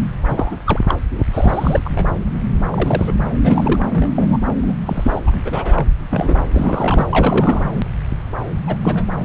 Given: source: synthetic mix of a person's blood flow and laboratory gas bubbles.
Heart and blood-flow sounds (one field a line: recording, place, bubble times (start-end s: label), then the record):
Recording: Doppler ultrasound of blood flow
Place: subclavian vein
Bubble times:
0.21-0.57 s: bubbles
0.66-0.79 s: bubbles
0.88-0.95 s: bubbles
1.18-1.24 s: bubbles
1.33-1.81 s: bubbles
1.84-2.06 s: bubbles
2.71-3.13 s: bubbles
3.42-3.80 s: bubbles
3.93-4.38 s: bubbles
4.62-4.75 s: bubbles
4.86-5.21 s: bubbles
5.26-5.41 s: bubbles
5.45-5.87 s: bubbles
6.10-6.41 s: bubbles
6.50-7.07 s: bubbles
7.09-7.63 s: bubbles
8.67-8.76 s: bubbles
8.82-9.04 s: bubbles
From the record:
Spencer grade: 3 (all of the cardiac periods contain showers or single bubble signals, but not dominating or overriding the cardiac motion signals)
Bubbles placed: anywhere in the cardiac cycle